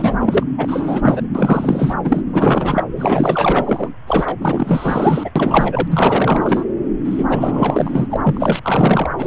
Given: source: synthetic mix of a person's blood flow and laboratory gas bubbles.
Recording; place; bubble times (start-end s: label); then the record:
Doppler ultrasound of blood flow; subclavian vein
0.00-0.14 s: bubbles
0.20-0.43 s: bubbles
0.57-1.25 s: bubbles
1.34-1.95 s: bubbles
2.04-2.21 s: bubbles
2.32-2.83 s: bubbles
2.95-3.89 s: bubbles
4.07-4.36 s: bubbles
4.41-5.31 s: bubbles
5.36-5.88 s: bubbles
5.91-6.65 s: bubbles
7.04-7.24 s: bubbles
7.29-8.06 s: bubbles
8.10-8.17 s: bubbles
8.23-9.11 s: bubbles
9.17-9.27 s: bubbles
From the record:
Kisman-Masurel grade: 444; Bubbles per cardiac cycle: continuous sound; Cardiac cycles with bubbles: 100%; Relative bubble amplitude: maximal (0.775 to 0.999); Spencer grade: 4 (maximum detectable bubble signal sounding continuously throughout systole and diastole of every cardiac period, and overriding the amplitude of the normal cardiac signals); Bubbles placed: anywhere in the cardiac cycle